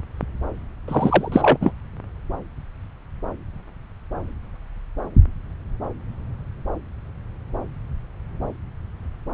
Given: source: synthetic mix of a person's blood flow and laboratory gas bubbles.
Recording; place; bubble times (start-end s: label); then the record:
Doppler ultrasound of blood flow; subclavian vein
0.88-1.29 s: bubbles
1.31-1.57 s: bubbles
1.61-1.72 s: bubbles
From the record:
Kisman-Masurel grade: 213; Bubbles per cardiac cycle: several, 3 to 8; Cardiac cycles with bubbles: 1 to 10%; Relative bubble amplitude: loud (0.450 to 0.775); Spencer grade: 1 (occasional bubble signal discernible with the cardiac motion signal, with majority of cardiac periods free of bubbles); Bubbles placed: anywhere in the cardiac cycle